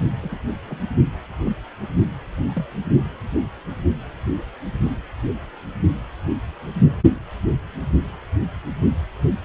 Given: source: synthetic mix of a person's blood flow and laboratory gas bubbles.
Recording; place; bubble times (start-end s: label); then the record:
Doppler ultrasound of blood flow; precordium
0.21-0.39 s: bubbles
0.69-0.83 s: bubbles
1.45-1.51 s: bubbles
2.43-2.64 s: bubbles
From the record:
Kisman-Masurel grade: 121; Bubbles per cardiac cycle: 1 to 2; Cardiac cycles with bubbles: 10 to 50%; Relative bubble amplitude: barely perceptible (0.100 to 0.250); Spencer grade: 2 (many but less than half of the cardiac periods contain bubble signals, singularly or in groups); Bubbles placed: only in the low amplitude regions of the cardiac cycle